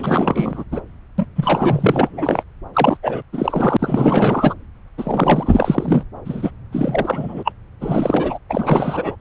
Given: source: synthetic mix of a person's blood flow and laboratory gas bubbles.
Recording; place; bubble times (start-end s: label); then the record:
Doppler ultrasound of blood flow; subclavian vein
0.00-0.64 s: bubbles
0.71-0.80 s: bubbles
1.18-1.26 s: bubbles
1.35-2.43 s: bubbles
2.73-2.97 s: bubbles
3.02-3.22 s: bubbles
3.32-4.54 s: bubbles
4.97-6.03 s: bubbles
6.25-6.50 s: bubbles
6.71-7.52 s: bubbles
7.81-8.39 s: bubbles
8.49-9.16 s: bubbles
From the record:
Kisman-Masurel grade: 444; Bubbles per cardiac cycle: continuous sound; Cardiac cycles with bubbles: 100%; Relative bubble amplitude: maximal (0.775 to 0.999); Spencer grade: 4 (maximum detectable bubble signal sounding continuously throughout systole and diastole of every cardiac period, and overriding the amplitude of the normal cardiac signals); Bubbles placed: anywhere in the cardiac cycle